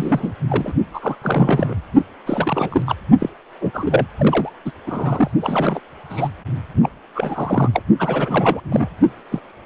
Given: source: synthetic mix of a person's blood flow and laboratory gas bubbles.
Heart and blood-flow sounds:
Doppler ultrasound of blood flow; precordium
0.00-0.32 s: bubbles
0.48-0.73 s: bubbles
0.94-1.15 s: bubbles
1.21-1.74 s: bubbles
2.26-2.83 s: bubbles
2.86-2.96 s: bubbles
3.19-3.29 s: bubbles
3.60-3.71 s: bubbles
3.73-4.07 s: bubbles
4.19-4.50 s: bubbles
4.65-4.71 s: bubbles
4.86-5.30 s: bubbles
5.41-5.80 s: bubbles
6.09-6.29 s: bubbles
6.76-6.89 s: bubbles
7.15-7.70 s: bubbles
7.73-7.82 s: bubbles
7.99-8.61 s: bubbles
8.65-8.89 s: bubbles
9.32-9.40 s: bubbles
From the record:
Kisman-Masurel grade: 342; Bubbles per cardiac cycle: rolling drumbeat, 9 or more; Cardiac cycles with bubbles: 100%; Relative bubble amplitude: moderate (0.250 to 0.450); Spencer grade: 3 (all of the cardiac periods contain showers or single bubble signals, but not dominating or overriding the cardiac motion signals); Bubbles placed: only in the low amplitude regions of the cardiac cycle

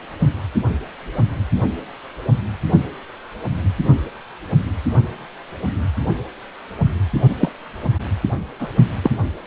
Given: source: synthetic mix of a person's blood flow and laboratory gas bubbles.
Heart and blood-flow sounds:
Doppler ultrasound of blood flow; precordium
7.40-7.49 s: bubbles
8.59-8.69 s: bubbles
9.03-9.11 s: bubbles
From the record:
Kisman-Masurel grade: 123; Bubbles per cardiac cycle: 1 to 2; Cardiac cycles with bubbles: 10 to 50%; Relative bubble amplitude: loud (0.450 to 0.775); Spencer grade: 2 (many but less than half of the cardiac periods contain bubble signals, singularly or in groups); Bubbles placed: only in the low amplitude regions of the cardiac cycle

